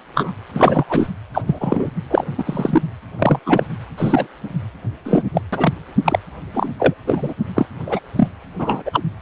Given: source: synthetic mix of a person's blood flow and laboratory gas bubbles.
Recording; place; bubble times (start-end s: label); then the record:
Doppler ultrasound of blood flow; precordium
0.15-0.32 s: bubbles
0.54-0.84 s: bubbles
0.89-1.09 s: bubbles
1.33-1.42 s: bubbles
1.47-1.89 s: bubbles
2.11-2.24 s: bubbles
2.38-2.82 s: bubbles
3.18-3.39 s: bubbles
3.46-3.63 s: bubbles
3.97-4.27 s: bubbles
5.04-5.23 s: bubbles
5.34-5.41 s: bubbles
5.52-5.73 s: bubbles
6.04-6.19 s: bubbles
6.54-6.69 s: bubbles
6.79-6.94 s: bubbles
7.06-7.33 s: bubbles
7.54-7.66 s: bubbles
7.86-7.99 s: bubbles
8.15-8.28 s: bubbles
8.58-8.82 s: bubbles
8.85-9.04 s: bubbles
From the record:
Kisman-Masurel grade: 243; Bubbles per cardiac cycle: several, 3 to 8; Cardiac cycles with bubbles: 100%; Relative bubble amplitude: loud (0.450 to 0.775); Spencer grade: 3 (all of the cardiac periods contain showers or single bubble signals, but not dominating or overriding the cardiac motion signals); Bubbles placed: anywhere in the cardiac cycle